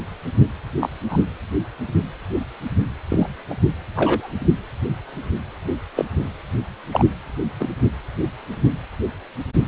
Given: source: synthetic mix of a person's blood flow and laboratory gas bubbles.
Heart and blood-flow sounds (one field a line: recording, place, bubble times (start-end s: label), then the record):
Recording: Doppler ultrasound of blood flow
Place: precordium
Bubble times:
0.80-0.90 s: bubbles
1.09-1.22 s: bubbles
3.08-3.27 s: bubbles
3.50-3.54 s: bubbles
3.96-4.33 s: bubbles
5.96-6.05 s: bubbles
6.92-7.05 s: bubbles
7.59-7.68 s: bubbles
From the record:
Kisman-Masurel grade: 122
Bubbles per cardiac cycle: 1 to 2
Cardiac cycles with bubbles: 10 to 50%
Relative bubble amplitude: moderate (0.250 to 0.450)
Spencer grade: 2 (many but less than half of the cardiac periods contain bubble signals, singularly or in groups)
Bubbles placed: anywhere in the cardiac cycle